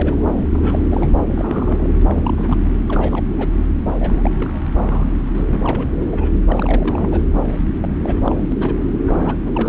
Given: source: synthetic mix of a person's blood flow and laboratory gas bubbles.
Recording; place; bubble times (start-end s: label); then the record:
Doppler ultrasound of blood flow; subclavian vein
0.00-0.26 s: bubbles
0.35-0.84 s: bubbles
0.90-1.11 s: bubbles
1.34-1.89 s: bubbles
2.08-2.59 s: bubbles
2.63-2.70 s: bubbles
2.89-3.24 s: bubbles
3.38-3.48 s: bubbles
3.86-3.91 s: bubbles
3.99-4.31 s: bubbles
4.39-4.61 s: bubbles
4.75-5.05 s: bubbles
5.34-5.45 s: bubbles
5.50-5.92 s: bubbles
5.96-6.31 s: bubbles
6.48-7.22 s: bubbles
7.81-7.97 s: bubbles
8.04-8.43 s: bubbles
8.50-8.53 s: bubbles
8.60-8.93 s: bubbles
9.06-9.43 s: bubbles
9.46-9.69 s: bubbles
From the record:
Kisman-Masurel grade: 342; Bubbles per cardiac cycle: rolling drumbeat, 9 or more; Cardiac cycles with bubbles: 100%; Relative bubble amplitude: moderate (0.250 to 0.450); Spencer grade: 3 (all of the cardiac periods contain showers or single bubble signals, but not dominating or overriding the cardiac motion signals); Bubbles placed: anywhere in the cardiac cycle